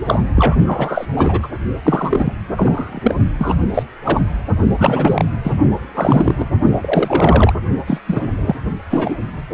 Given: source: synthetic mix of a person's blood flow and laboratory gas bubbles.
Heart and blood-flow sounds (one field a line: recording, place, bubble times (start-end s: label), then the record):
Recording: Doppler ultrasound of blood flow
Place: precordium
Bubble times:
0.05-0.23 s: bubbles
0.34-0.56 s: bubbles
0.66-1.06 s: bubbles
1.16-1.48 s: bubbles
1.84-2.33 s: bubbles
2.56-3.15 s: bubbles
3.38-3.55 s: bubbles
3.74-3.83 s: bubbles
4.03-4.25 s: bubbles
4.78-5.25 s: bubbles
5.44-5.52 s: bubbles
5.94-6.35 s: bubbles
6.38-6.47 s: bubbles
6.81-7.53 s: bubbles
7.87-8.00 s: bubbles
8.07-8.21 s: bubbles
8.46-8.55 s: bubbles
8.90-9.17 s: bubbles
From the record:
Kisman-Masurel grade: 343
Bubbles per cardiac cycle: rolling drumbeat, 9 or more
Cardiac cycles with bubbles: 100%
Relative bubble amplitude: loud (0.450 to 0.775)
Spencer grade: 3 (all of the cardiac periods contain showers or single bubble signals, but not dominating or overriding the cardiac motion signals)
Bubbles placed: only in the low amplitude regions of the cardiac cycle